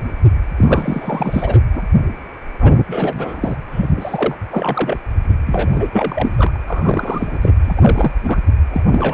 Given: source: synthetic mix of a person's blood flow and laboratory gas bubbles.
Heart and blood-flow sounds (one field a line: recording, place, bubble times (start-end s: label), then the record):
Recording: Doppler ultrasound of blood flow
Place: precordium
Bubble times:
0.57-1.60 s: bubbles
1.73-1.83 s: bubbles
2.60-2.72 s: bubbles
2.87-3.56 s: bubbles
3.72-3.90 s: bubbles
3.97-4.35 s: bubbles
4.51-4.97 s: bubbles
5.46-5.71 s: bubbles
5.73-5.88 s: bubbles
5.91-6.29 s: bubbles
6.37-6.58 s: bubbles
6.66-7.54 s: bubbles
7.64-8.12 s: bubbles
8.23-8.38 s: bubbles
8.70-8.82 s: bubbles
8.91-9.14 s: bubbles
From the record:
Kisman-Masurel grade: 333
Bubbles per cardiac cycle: rolling drumbeat, 9 or more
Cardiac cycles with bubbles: 50 to 99%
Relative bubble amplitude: loud (0.450 to 0.775)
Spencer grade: 3 (all of the cardiac periods contain showers or single bubble signals, but not dominating or overriding the cardiac motion signals)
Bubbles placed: anywhere in the cardiac cycle